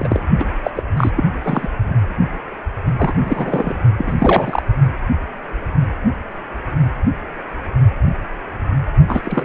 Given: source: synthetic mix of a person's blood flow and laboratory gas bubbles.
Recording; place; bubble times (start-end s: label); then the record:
Doppler ultrasound of blood flow; precordium
0.00-0.22 s: bubbles
0.39-0.45 s: bubbles
0.64-0.70 s: bubbles
0.73-0.83 s: bubbles
0.97-1.11 s: bubbles
1.16-1.24 s: bubbles
1.43-1.69 s: bubbles
2.97-3.13 s: bubbles
3.21-3.78 s: bubbles
3.97-4.16 s: bubbles
4.18-4.62 s: bubbles
9.08-9.45 s: bubbles
From the record:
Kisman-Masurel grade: 333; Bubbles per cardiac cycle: rolling drumbeat, 9 or more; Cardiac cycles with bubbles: 50 to 99%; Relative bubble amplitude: loud (0.450 to 0.775); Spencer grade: 3 (all of the cardiac periods contain showers or single bubble signals, but not dominating or overriding the cardiac motion signals); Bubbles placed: only in the low amplitude regions of the cardiac cycle